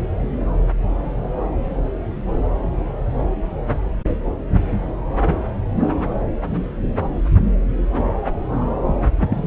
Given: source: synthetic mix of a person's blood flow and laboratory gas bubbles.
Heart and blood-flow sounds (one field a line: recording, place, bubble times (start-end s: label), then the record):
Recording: Doppler ultrasound of blood flow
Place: subclavian vein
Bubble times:
9.18-9.47 s: bubbles
From the record:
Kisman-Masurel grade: 212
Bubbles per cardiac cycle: several, 3 to 8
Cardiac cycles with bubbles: 1 to 10%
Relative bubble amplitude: moderate (0.250 to 0.450)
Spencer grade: 1 (occasional bubble signal discernible with the cardiac motion signal, with majority of cardiac periods free of bubbles)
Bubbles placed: anywhere in the cardiac cycle